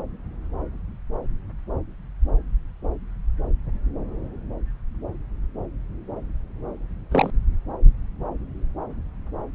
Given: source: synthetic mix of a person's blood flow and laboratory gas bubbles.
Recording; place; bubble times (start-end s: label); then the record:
Doppler ultrasound of blood flow; subclavian vein
7.11-7.31 s: bubbles
From the record:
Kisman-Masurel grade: 112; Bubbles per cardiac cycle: 1 to 2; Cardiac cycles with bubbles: 1 to 10%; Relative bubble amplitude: moderate (0.250 to 0.450); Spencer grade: 1 (occasional bubble signal discernible with the cardiac motion signal, with majority of cardiac periods free of bubbles); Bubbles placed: anywhere in the cardiac cycle